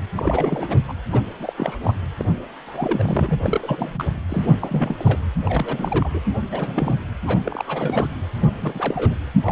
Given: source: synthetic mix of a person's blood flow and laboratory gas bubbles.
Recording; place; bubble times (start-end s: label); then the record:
Doppler ultrasound of blood flow; precordium
0.15-0.81 s: bubbles
0.88-0.93 s: bubbles
1.11-1.21 s: bubbles
1.39-1.53 s: bubbles
1.57-1.78 s: bubbles
1.83-1.96 s: bubbles
2.19-2.25 s: bubbles
2.67-3.40 s: bubbles
3.43-4.05 s: bubbles
4.29-4.45 s: bubbles
4.61-5.19 s: bubbles
5.45-6.10 s: bubbles
6.13-6.20 s: bubbles
6.46-6.94 s: bubbles
7.24-7.39 s: bubbles
7.44-8.08 s: bubbles
8.35-8.50 s: bubbles
8.61-9.15 s: bubbles
9.46-9.52 s: bubbles
From the record:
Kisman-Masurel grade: 342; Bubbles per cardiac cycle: rolling drumbeat, 9 or more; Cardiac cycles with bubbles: 100%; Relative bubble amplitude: moderate (0.250 to 0.450); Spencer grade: 3 (all of the cardiac periods contain showers or single bubble signals, but not dominating or overriding the cardiac motion signals); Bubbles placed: anywhere in the cardiac cycle